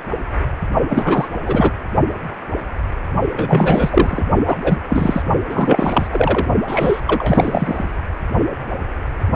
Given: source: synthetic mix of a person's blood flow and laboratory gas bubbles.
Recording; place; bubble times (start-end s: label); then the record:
Doppler ultrasound of blood flow; precordium
0.89-1.28 s: bubbles
1.44-1.71 s: bubbles
3.36-4.24 s: bubbles
4.47-4.57 s: bubbles
4.63-4.78 s: bubbles
4.89-5.22 s: bubbles
5.49-6.48 s: bubbles
6.67-7.01 s: bubbles
7.05-7.91 s: bubbles
From the record:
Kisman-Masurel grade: 333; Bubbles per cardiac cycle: rolling drumbeat, 9 or more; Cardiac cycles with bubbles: 50 to 99%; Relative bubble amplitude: loud (0.450 to 0.775); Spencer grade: 3 (all of the cardiac periods contain showers or single bubble signals, but not dominating or overriding the cardiac motion signals); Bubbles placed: only in the low amplitude regions of the cardiac cycle